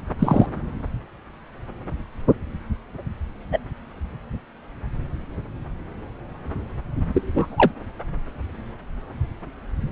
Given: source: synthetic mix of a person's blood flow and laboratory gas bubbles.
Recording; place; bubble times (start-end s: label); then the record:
Doppler ultrasound of blood flow; subclavian vein
0.18-0.46 s: bubbles
3.52-3.58 s: bubbles
7.14-7.72 s: bubbles
From the record:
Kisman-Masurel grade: 123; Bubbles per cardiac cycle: 1 to 2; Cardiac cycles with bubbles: 10 to 50%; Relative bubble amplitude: loud (0.450 to 0.775); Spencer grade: 2 (many but less than half of the cardiac periods contain bubble signals, singularly or in groups); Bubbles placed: anywhere in the cardiac cycle